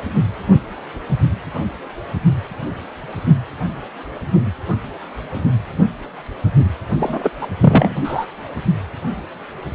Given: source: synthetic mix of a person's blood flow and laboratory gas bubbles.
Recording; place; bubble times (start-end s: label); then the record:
Doppler ultrasound of blood flow; precordium
7.00-7.29 s: bubbles
7.41-7.47 s: bubbles
7.61-8.26 s: bubbles
From the record:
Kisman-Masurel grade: 213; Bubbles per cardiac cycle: several, 3 to 8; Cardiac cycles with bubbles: 1 to 10%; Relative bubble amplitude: loud (0.450 to 0.775); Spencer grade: 1 (occasional bubble signal discernible with the cardiac motion signal, with majority of cardiac periods free of bubbles); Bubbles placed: only in the low amplitude regions of the cardiac cycle